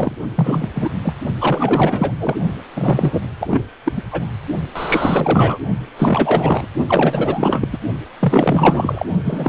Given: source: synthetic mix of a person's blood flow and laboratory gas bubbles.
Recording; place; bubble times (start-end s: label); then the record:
Doppler ultrasound of blood flow; precordium
0.00-0.15 s: bubbles
0.35-0.68 s: bubbles
0.74-0.90 s: bubbles
1.03-1.16 s: bubbles
1.41-2.38 s: bubbles
2.74-3.21 s: bubbles
3.40-3.65 s: bubbles
3.84-4.03 s: bubbles
4.11-4.31 s: bubbles
4.76-5.60 s: bubbles
5.97-6.67 s: bubbles
6.89-7.68 s: bubbles
7.72-7.78 s: bubbles
8.19-9.05 s: bubbles
9.24-9.49 s: bubbles
From the record:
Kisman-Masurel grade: 444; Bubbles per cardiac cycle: continuous sound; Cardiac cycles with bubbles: 100%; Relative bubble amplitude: maximal (0.775 to 0.999); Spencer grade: 4 (maximum detectable bubble signal sounding continuously throughout systole and diastole of every cardiac period, and overriding the amplitude of the normal cardiac signals); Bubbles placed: only in the low amplitude regions of the cardiac cycle